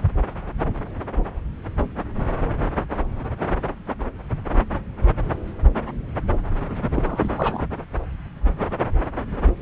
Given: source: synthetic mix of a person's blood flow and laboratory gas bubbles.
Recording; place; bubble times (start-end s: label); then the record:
Doppler ultrasound of blood flow; subclavian vein
6.92-7.64 s: bubbles
From the record:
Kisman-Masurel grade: 211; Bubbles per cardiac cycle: several, 3 to 8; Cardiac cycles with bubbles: 1 to 10%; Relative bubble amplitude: barely perceptible (0.100 to 0.250); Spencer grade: 1 (occasional bubble signal discernible with the cardiac motion signal, with majority of cardiac periods free of bubbles); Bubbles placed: anywhere in the cardiac cycle